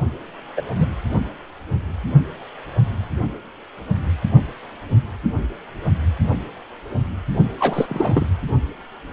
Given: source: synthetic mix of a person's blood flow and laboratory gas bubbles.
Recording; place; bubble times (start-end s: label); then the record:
Doppler ultrasound of blood flow; precordium
0.56-0.62 s: bubbles
0.75-0.86 s: bubbles
7.59-7.86 s: bubbles
7.88-8.26 s: bubbles
From the record:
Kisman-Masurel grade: 223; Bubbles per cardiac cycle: several, 3 to 8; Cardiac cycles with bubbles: 10 to 50%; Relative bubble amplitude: loud (0.450 to 0.775); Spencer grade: 2 (many but less than half of the cardiac periods contain bubble signals, singularly or in groups); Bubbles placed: only in the low amplitude regions of the cardiac cycle